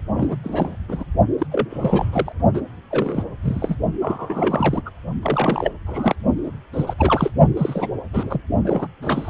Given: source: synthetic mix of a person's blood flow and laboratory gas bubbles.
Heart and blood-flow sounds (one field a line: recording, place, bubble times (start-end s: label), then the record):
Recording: Doppler ultrasound of blood flow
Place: precordium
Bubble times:
0.14-0.37 s: bubbles
0.44-0.76 s: bubbles
0.89-1.04 s: bubbles
1.38-1.47 s: bubbles
1.51-1.67 s: bubbles
1.70-2.32 s: bubbles
2.54-2.61 s: bubbles
2.91-3.24 s: bubbles
3.42-3.75 s: bubbles
4.01-4.81 s: bubbles
4.85-4.90 s: bubbles
5.23-5.71 s: bubbles
5.87-6.15 s: bubbles
6.46-6.51 s: bubbles
6.73-6.94 s: bubbles
6.98-7.30 s: bubbles
7.57-7.88 s: bubbles
8.12-8.41 s: bubbles
8.65-8.88 s: bubbles
9.02-9.29 s: bubbles
From the record:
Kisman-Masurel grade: 342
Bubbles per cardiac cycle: rolling drumbeat, 9 or more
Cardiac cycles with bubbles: 100%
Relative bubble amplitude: moderate (0.250 to 0.450)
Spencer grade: 3 (all of the cardiac periods contain showers or single bubble signals, but not dominating or overriding the cardiac motion signals)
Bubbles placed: only in the low amplitude regions of the cardiac cycle